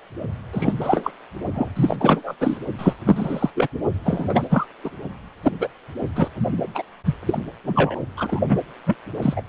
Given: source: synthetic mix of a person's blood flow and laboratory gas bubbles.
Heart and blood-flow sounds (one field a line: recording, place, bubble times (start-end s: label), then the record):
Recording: Doppler ultrasound of blood flow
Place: precordium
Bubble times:
0.53-0.73 s: bubbles
0.80-1.10 s: bubbles
1.55-1.69 s: bubbles
1.76-1.96 s: bubbles
2.00-2.34 s: bubbles
2.40-2.58 s: bubbles
2.78-2.94 s: bubbles
3.05-3.50 s: bubbles
3.55-3.68 s: bubbles
4.05-4.66 s: bubbles
4.83-4.90 s: bubbles
5.43-5.53 s: bubbles
5.60-5.67 s: bubbles
6.15-6.28 s: bubbles
6.75-6.83 s: bubbles
7.05-7.15 s: bubbles
7.26-7.42 s: bubbles
7.64-7.99 s: bubbles
8.17-8.40 s: bubbles
8.48-8.59 s: bubbles
8.86-8.96 s: bubbles
9.21-9.42 s: bubbles
From the record:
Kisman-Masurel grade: 233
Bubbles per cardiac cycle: several, 3 to 8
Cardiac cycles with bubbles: 50 to 99%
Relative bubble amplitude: loud (0.450 to 0.775)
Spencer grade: 3 (all of the cardiac periods contain showers or single bubble signals, but not dominating or overriding the cardiac motion signals)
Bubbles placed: only in the low amplitude regions of the cardiac cycle